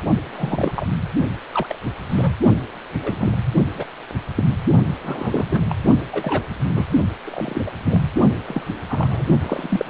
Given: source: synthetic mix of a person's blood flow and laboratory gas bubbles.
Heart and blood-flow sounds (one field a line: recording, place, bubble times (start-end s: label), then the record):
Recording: Doppler ultrasound of blood flow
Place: precordium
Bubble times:
0.33-0.73 s: bubbles
0.76-0.86 s: bubbles
1.54-1.78 s: bubbles
2.09-2.34 s: bubbles
2.92-3.37 s: bubbles
3.75-3.85 s: bubbles
4.35-4.44 s: bubbles
5.04-5.75 s: bubbles
6.12-6.42 s: bubbles
6.69-6.86 s: bubbles
7.24-7.73 s: bubbles
7.85-8.02 s: bubbles
8.47-8.62 s: bubbles
8.88-9.37 s: bubbles
9.40-9.90 s: bubbles
From the record:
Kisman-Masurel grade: 242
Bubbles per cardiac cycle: several, 3 to 8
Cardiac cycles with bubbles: 100%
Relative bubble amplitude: moderate (0.250 to 0.450)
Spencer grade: 3 (all of the cardiac periods contain showers or single bubble signals, but not dominating or overriding the cardiac motion signals)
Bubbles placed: only in the low amplitude regions of the cardiac cycle